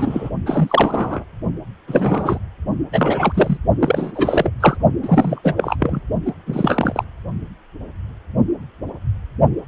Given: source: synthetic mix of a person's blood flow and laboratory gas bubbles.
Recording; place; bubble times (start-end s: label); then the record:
Doppler ultrasound of blood flow; precordium
0.00-0.30 s: bubbles
0.46-1.24 s: bubbles
1.87-2.39 s: bubbles
2.92-3.58 s: bubbles
3.79-4.12 s: bubbles
4.14-4.50 s: bubbles
4.60-4.77 s: bubbles
5.02-5.75 s: bubbles
5.79-6.00 s: bubbles
6.25-6.32 s: bubbles
6.46-7.04 s: bubbles
From the record:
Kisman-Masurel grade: 333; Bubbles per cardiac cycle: rolling drumbeat, 9 or more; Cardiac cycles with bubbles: 50 to 99%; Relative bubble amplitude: loud (0.450 to 0.775); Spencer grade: 3 (all of the cardiac periods contain showers or single bubble signals, but not dominating or overriding the cardiac motion signals); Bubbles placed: only in the low amplitude regions of the cardiac cycle